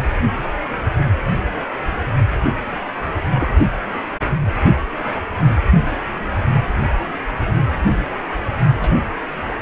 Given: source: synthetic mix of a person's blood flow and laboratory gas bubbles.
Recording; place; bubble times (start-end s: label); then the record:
Doppler ultrasound of blood flow; precordium
3.34-3.50 s: bubbles
8.81-8.89 s: bubbles
9.43-9.54 s: bubbles
From the record:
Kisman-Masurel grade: 122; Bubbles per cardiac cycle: 1 to 2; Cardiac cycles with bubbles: 10 to 50%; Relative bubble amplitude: moderate (0.250 to 0.450); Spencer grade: 2 (many but less than half of the cardiac periods contain bubble signals, singularly or in groups); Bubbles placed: only in the low amplitude regions of the cardiac cycle